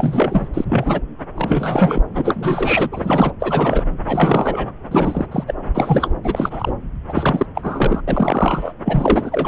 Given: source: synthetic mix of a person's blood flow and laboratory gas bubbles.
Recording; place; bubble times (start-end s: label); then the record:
Doppler ultrasound of blood flow; subclavian vein
0.00-0.49 s: bubbles
0.53-0.65 s: bubbles
0.69-1.01 s: bubbles
1.35-2.02 s: bubbles
2.14-2.89 s: bubbles
2.92-3.33 s: bubbles
3.40-3.84 s: bubbles
4.06-4.72 s: bubbles
4.91-5.26 s: bubbles
5.31-5.43 s: bubbles
5.47-5.54 s: bubbles
5.73-6.12 s: bubbles
6.23-6.73 s: bubbles
7.08-7.46 s: bubbles
7.55-8.02 s: bubbles
8.08-8.73 s: bubbles
8.85-9.48 s: bubbles
From the record:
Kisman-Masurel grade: 343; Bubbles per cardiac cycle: rolling drumbeat, 9 or more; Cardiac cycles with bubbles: 100%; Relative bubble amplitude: loud (0.450 to 0.775); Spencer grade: 3 (all of the cardiac periods contain showers or single bubble signals, but not dominating or overriding the cardiac motion signals); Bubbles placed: anywhere in the cardiac cycle